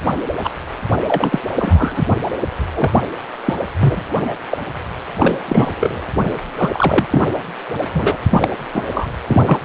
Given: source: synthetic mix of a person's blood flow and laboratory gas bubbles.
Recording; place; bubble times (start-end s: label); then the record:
Doppler ultrasound of blood flow; precordium
0.44-0.50 s: bubbles
1.07-1.40 s: bubbles
1.58-2.03 s: bubbles
2.75-2.90 s: bubbles
3.46-3.54 s: bubbles
3.80-4.03 s: bubbles
4.23-4.34 s: bubbles
4.51-4.58 s: bubbles
5.19-5.38 s: bubbles
5.48-5.75 s: bubbles
5.79-6.01 s: bubbles
6.57-7.06 s: bubbles
7.10-7.22 s: bubbles
7.94-8.17 s: bubbles
8.29-8.50 s: bubbles
8.72-8.82 s: bubbles
8.92-9.08 s: bubbles
9.28-9.42 s: bubbles
9.45-9.57 s: bubbles
From the record:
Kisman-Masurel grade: 233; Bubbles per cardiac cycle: several, 3 to 8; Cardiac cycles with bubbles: 50 to 99%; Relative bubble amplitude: loud (0.450 to 0.775); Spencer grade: 3 (all of the cardiac periods contain showers or single bubble signals, but not dominating or overriding the cardiac motion signals); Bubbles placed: anywhere in the cardiac cycle